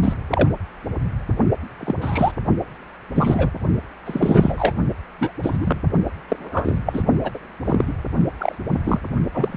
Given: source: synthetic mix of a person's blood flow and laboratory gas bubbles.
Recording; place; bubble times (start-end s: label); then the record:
Doppler ultrasound of blood flow; precordium
0.00-0.14 s: bubbles
0.30-0.48 s: bubbles
1.79-1.95 s: bubbles
2.01-2.32 s: bubbles
3.15-3.50 s: bubbles
4.05-4.72 s: bubbles
5.18-5.31 s: bubbles
5.42-5.57 s: bubbles
5.60-5.80 s: bubbles
6.28-6.80 s: bubbles
6.85-7.03 s: bubbles
7.23-7.31 s: bubbles
7.34-7.39 s: bubbles
7.65-7.93 s: bubbles
8.38-8.55 s: bubbles
8.71-8.78 s: bubbles
8.85-9.00 s: bubbles
9.34-9.57 s: bubbles
From the record:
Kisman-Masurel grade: 242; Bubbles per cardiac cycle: several, 3 to 8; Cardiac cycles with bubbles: 100%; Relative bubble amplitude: moderate (0.250 to 0.450); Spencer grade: 3 (all of the cardiac periods contain showers or single bubble signals, but not dominating or overriding the cardiac motion signals); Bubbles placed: only in the low amplitude regions of the cardiac cycle